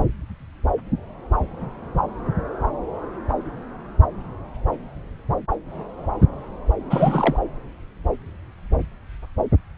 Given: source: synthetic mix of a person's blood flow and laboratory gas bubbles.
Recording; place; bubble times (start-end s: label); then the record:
Doppler ultrasound of blood flow; subclavian vein
6.90-7.38 s: bubbles
From the record:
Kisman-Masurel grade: 212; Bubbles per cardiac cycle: several, 3 to 8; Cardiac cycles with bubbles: 1 to 10%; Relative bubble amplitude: moderate (0.250 to 0.450); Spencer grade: 1 (occasional bubble signal discernible with the cardiac motion signal, with majority of cardiac periods free of bubbles); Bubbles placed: anywhere in the cardiac cycle